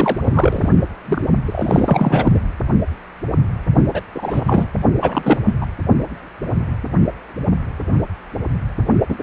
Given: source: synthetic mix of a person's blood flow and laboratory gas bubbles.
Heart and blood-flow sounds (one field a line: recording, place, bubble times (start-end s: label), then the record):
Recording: Doppler ultrasound of blood flow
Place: precordium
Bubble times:
0.00-0.21 s: bubbles
0.23-0.69 s: bubbles
1.05-1.28 s: bubbles
1.45-2.40 s: bubbles
3.94-4.01 s: bubbles
4.15-4.67 s: bubbles
5.01-5.38 s: bubbles
5.46-5.54 s: bubbles
5.61-5.66 s: bubbles
9.09-9.15 s: bubbles
9.18-9.23 s: bubbles
From the record:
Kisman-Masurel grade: 333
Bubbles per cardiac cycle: rolling drumbeat, 9 or more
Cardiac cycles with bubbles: 50 to 99%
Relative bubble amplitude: loud (0.450 to 0.775)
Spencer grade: 3 (all of the cardiac periods contain showers or single bubble signals, but not dominating or overriding the cardiac motion signals)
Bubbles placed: only in the low amplitude regions of the cardiac cycle